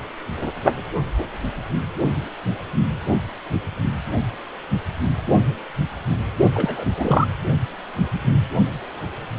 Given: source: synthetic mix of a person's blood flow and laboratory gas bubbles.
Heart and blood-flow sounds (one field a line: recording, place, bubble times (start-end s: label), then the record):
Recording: Doppler ultrasound of blood flow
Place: precordium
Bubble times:
6.54-7.27 s: bubbles
From the record:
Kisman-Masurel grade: 212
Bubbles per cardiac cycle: several, 3 to 8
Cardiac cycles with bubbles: 1 to 10%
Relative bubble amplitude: moderate (0.250 to 0.450)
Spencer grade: 1 (occasional bubble signal discernible with the cardiac motion signal, with majority of cardiac periods free of bubbles)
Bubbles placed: only in the low amplitude regions of the cardiac cycle